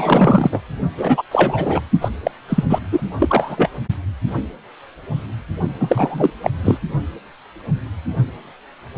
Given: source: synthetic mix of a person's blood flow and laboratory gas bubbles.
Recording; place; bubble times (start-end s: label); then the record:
Doppler ultrasound of blood flow; precordium
0.00-0.60 s: bubbles
0.97-1.22 s: bubbles
1.31-1.82 s: bubbles
2.01-2.09 s: bubbles
2.23-2.31 s: bubbles
2.49-2.63 s: bubbles
2.69-2.79 s: bubbles
2.92-3.01 s: bubbles
3.20-3.69 s: bubbles
5.80-6.30 s: bubbles
6.41-6.50 s: bubbles
6.62-6.78 s: bubbles
From the record:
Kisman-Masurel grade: 333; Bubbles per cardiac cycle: rolling drumbeat, 9 or more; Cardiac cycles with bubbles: 50 to 99%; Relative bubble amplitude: loud (0.450 to 0.775); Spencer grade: 3 (all of the cardiac periods contain showers or single bubble signals, but not dominating or overriding the cardiac motion signals); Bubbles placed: only in the low amplitude regions of the cardiac cycle